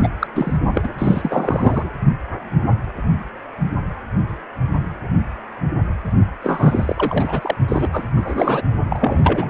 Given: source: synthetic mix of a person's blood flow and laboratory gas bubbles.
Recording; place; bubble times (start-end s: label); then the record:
Doppler ultrasound of blood flow; precordium
0.00-0.09 s: bubbles
0.19-0.27 s: bubbles
0.34-0.58 s: bubbles
0.73-0.89 s: bubbles
0.98-1.90 s: bubbles
6.42-7.56 s: bubbles
7.68-7.88 s: bubbles
7.92-8.04 s: bubbles
8.17-8.62 s: bubbles
8.89-9.49 s: bubbles
From the record:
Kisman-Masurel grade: 333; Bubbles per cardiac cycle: rolling drumbeat, 9 or more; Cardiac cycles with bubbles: 50 to 99%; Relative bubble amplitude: loud (0.450 to 0.775); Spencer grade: 3 (all of the cardiac periods contain showers or single bubble signals, but not dominating or overriding the cardiac motion signals); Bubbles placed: only in the low amplitude regions of the cardiac cycle